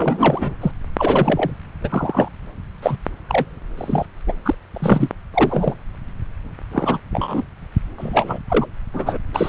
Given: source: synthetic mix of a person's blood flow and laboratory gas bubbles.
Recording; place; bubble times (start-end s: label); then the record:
Doppler ultrasound of blood flow; subclavian vein
0.00-0.55 s: bubbles
0.60-0.72 s: bubbles
0.98-1.51 s: bubbles
1.83-2.29 s: bubbles
2.82-2.96 s: bubbles
3.29-3.46 s: bubbles
3.77-4.06 s: bubbles
4.26-4.33 s: bubbles
4.45-4.54 s: bubbles
4.74-5.09 s: bubbles
5.33-5.74 s: bubbles
6.71-7.00 s: bubbles
7.10-7.43 s: bubbles
7.98-8.39 s: bubbles
8.49-8.67 s: bubbles
8.94-9.18 s: bubbles
9.33-9.49 s: bubbles
From the record:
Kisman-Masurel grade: 243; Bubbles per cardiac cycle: several, 3 to 8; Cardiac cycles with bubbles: 100%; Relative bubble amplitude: loud (0.450 to 0.775); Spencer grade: 3 (all of the cardiac periods contain showers or single bubble signals, but not dominating or overriding the cardiac motion signals); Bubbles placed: anywhere in the cardiac cycle